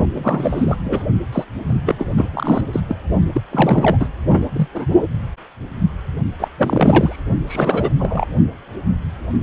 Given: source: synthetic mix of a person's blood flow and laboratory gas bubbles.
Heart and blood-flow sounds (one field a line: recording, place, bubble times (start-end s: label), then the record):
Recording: Doppler ultrasound of blood flow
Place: precordium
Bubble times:
0.15-0.77 s: bubbles
0.85-1.05 s: bubbles
1.32-1.45 s: bubbles
1.68-1.81 s: bubbles
1.86-1.95 s: bubbles
1.99-2.29 s: bubbles
2.33-2.61 s: bubbles
2.72-2.80 s: bubbles
2.88-2.96 s: bubbles
3.33-3.42 s: bubbles
3.51-3.97 s: bubbles
4.00-4.08 s: bubbles
4.28-4.46 s: bubbles
4.53-4.68 s: bubbles
4.74-4.87 s: bubbles
6.39-6.48 s: bubbles
6.58-7.22 s: bubbles
7.47-7.89 s: bubbles
7.99-8.28 s: bubbles
From the record:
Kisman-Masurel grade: 333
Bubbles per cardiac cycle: rolling drumbeat, 9 or more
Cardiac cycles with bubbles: 50 to 99%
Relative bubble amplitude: loud (0.450 to 0.775)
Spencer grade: 3 (all of the cardiac periods contain showers or single bubble signals, but not dominating or overriding the cardiac motion signals)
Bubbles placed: only in the low amplitude regions of the cardiac cycle